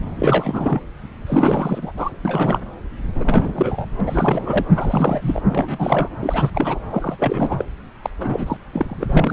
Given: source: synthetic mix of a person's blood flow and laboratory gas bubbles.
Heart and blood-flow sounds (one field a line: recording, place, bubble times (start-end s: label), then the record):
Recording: Doppler ultrasound of blood flow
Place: subclavian vein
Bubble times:
0.16-0.80 s: bubbles
1.26-1.93 s: bubbles
1.97-2.10 s: bubbles
2.25-2.60 s: bubbles
3.15-3.85 s: bubbles
3.98-4.00 s: bubbles
4.04-4.65 s: bubbles
4.75-5.40 s: bubbles
5.46-6.09 s: bubbles
6.21-6.50 s: bubbles
6.54-6.80 s: bubbles
6.90-7.65 s: bubbles
8.03-8.10 s: bubbles
8.20-8.57 s: bubbles
8.71-9.05 s: bubbles
9.10-9.33 s: bubbles
From the record:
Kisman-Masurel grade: 342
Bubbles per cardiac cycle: rolling drumbeat, 9 or more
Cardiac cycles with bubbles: 100%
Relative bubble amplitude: moderate (0.250 to 0.450)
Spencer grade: 3 (all of the cardiac periods contain showers or single bubble signals, but not dominating or overriding the cardiac motion signals)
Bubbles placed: anywhere in the cardiac cycle